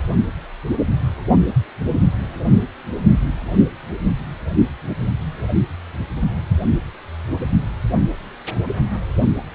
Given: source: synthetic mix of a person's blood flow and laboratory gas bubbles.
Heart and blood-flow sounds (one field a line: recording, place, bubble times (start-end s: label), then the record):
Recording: Doppler ultrasound of blood flow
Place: precordium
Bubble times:
no bubbles
From the record:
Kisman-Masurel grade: 000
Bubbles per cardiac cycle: 0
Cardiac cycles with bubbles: 0%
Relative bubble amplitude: no bubbles discernible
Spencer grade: 0 (complete lack of bubble signals)